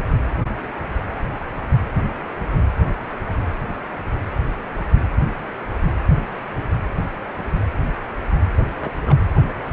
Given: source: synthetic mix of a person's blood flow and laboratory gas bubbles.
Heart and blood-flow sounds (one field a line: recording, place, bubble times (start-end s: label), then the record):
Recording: Doppler ultrasound of blood flow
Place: precordium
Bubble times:
8.54-8.71 s: bubbles
8.80-8.91 s: bubbles
9.00-9.26 s: bubbles
From the record:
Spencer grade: 1 (occasional bubble signal discernible with the cardiac motion signal, with majority of cardiac periods free of bubbles)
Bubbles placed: anywhere in the cardiac cycle